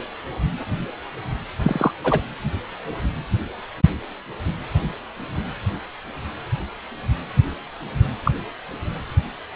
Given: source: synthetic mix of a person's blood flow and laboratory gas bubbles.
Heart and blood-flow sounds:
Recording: Doppler ultrasound of blood flow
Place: precordium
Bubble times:
1.62-1.92 s: bubbles
2.03-2.21 s: bubbles
8.25-8.31 s: bubbles
From the record:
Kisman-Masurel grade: 123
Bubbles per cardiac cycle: 1 to 2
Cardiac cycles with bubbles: 10 to 50%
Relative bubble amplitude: loud (0.450 to 0.775)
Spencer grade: 2 (many but less than half of the cardiac periods contain bubble signals, singularly or in groups)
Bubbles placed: anywhere in the cardiac cycle

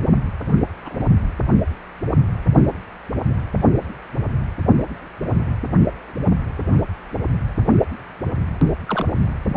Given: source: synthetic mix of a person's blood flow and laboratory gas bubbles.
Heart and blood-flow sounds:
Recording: Doppler ultrasound of blood flow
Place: precordium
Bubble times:
0.83-1.08 s: bubbles
8.88-9.06 s: bubbles
From the record:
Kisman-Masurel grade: 122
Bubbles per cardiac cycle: 1 to 2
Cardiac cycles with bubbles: 10 to 50%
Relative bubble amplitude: moderate (0.250 to 0.450)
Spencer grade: 2 (many but less than half of the cardiac periods contain bubble signals, singularly or in groups)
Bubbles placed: only in the low amplitude regions of the cardiac cycle

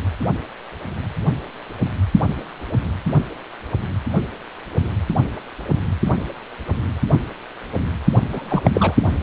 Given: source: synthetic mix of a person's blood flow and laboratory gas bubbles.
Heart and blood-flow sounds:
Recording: Doppler ultrasound of blood flow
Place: precordium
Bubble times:
8.31-8.71 s: bubbles
8.73-8.94 s: bubbles
From the record:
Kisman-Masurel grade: 212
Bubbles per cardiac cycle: several, 3 to 8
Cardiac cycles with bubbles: 1 to 10%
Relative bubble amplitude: moderate (0.250 to 0.450)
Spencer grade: 1 (occasional bubble signal discernible with the cardiac motion signal, with majority of cardiac periods free of bubbles)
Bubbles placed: only in the low amplitude regions of the cardiac cycle

